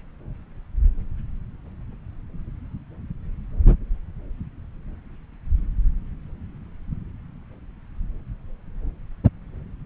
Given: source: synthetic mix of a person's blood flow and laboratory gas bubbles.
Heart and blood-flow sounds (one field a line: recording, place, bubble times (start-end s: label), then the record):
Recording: Doppler ultrasound of blood flow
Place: subclavian vein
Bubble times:
no bubbles
From the record:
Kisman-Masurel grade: 000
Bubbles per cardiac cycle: 0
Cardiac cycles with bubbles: 0%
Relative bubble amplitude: no bubbles discernible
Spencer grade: 0 (complete lack of bubble signals)